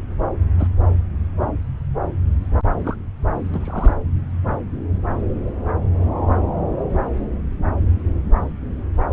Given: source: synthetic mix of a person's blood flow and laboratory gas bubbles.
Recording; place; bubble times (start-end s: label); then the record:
Doppler ultrasound of blood flow; subclavian vein
0.58-0.68 s: bubbles
2.84-2.95 s: bubbles
3.53-3.97 s: bubbles
From the record:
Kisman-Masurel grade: 121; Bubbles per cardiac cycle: 1 to 2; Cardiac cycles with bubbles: 10 to 50%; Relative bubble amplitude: barely perceptible (0.100 to 0.250); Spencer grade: 2 (many but less than half of the cardiac periods contain bubble signals, singularly or in groups); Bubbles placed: anywhere in the cardiac cycle